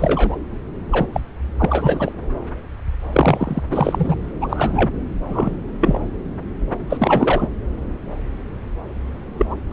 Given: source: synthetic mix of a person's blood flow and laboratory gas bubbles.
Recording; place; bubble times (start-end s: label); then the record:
Doppler ultrasound of blood flow; subclavian vein
0.00-0.36 s: bubbles
0.91-1.07 s: bubbles
1.12-1.21 s: bubbles
1.57-2.12 s: bubbles
3.12-3.63 s: bubbles
3.71-4.15 s: bubbles
4.41-4.92 s: bubbles
5.28-5.56 s: bubbles
5.80-6.06 s: bubbles
6.89-7.47 s: bubbles
9.38-9.46 s: bubbles
9.50-9.56 s: bubbles
9.71-9.73 s: bubbles
From the record:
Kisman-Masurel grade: 233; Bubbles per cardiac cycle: several, 3 to 8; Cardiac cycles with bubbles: 50 to 99%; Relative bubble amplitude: loud (0.450 to 0.775); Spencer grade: 3 (all of the cardiac periods contain showers or single bubble signals, but not dominating or overriding the cardiac motion signals); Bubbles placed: anywhere in the cardiac cycle